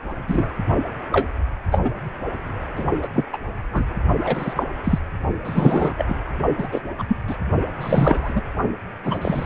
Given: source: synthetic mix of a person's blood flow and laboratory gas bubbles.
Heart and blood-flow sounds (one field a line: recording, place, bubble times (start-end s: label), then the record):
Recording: Doppler ultrasound of blood flow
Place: precordium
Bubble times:
0.27-0.50 s: bubbles
1.12-1.28 s: bubbles
1.71-1.81 s: bubbles
1.84-1.91 s: bubbles
2.75-2.84 s: bubbles
3.02-3.08 s: bubbles
3.13-3.25 s: bubbles
3.32-3.38 s: bubbles
3.73-3.85 s: bubbles
4.23-4.64 s: bubbles
4.83-4.99 s: bubbles
5.44-6.06 s: bubbles
6.08-6.20 s: bubbles
6.58-6.68 s: bubbles
6.72-6.81 s: bubbles
6.99-7.04 s: bubbles
7.07-7.17 s: bubbles
7.27-7.37 s: bubbles
7.80-8.42 s: bubbles
9.04-9.18 s: bubbles
9.21-9.45 s: bubbles
From the record:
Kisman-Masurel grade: 243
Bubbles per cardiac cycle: several, 3 to 8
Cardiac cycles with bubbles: 100%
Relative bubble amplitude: loud (0.450 to 0.775)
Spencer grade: 3 (all of the cardiac periods contain showers or single bubble signals, but not dominating or overriding the cardiac motion signals)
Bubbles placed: only in the low amplitude regions of the cardiac cycle